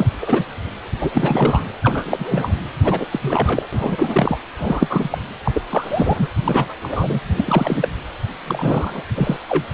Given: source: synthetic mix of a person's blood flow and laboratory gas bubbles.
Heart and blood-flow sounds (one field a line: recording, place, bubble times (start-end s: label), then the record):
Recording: Doppler ultrasound of blood flow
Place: precordium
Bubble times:
0.00-0.10 s: bubbles
0.21-0.45 s: bubbles
1.01-1.68 s: bubbles
1.83-2.55 s: bubbles
2.83-3.06 s: bubbles
3.12-3.67 s: bubbles
3.73-4.41 s: bubbles
4.58-5.18 s: bubbles
5.44-5.62 s: bubbles
5.70-6.28 s: bubbles
6.44-6.74 s: bubbles
6.82-7.21 s: bubbles
7.37-7.88 s: bubbles
8.45-9.04 s: bubbles
9.15-9.37 s: bubbles
9.48-9.64 s: bubbles
From the record:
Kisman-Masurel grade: 343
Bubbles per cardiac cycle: rolling drumbeat, 9 or more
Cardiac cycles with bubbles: 100%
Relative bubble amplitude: loud (0.450 to 0.775)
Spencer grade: 3 (all of the cardiac periods contain showers or single bubble signals, but not dominating or overriding the cardiac motion signals)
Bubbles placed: anywhere in the cardiac cycle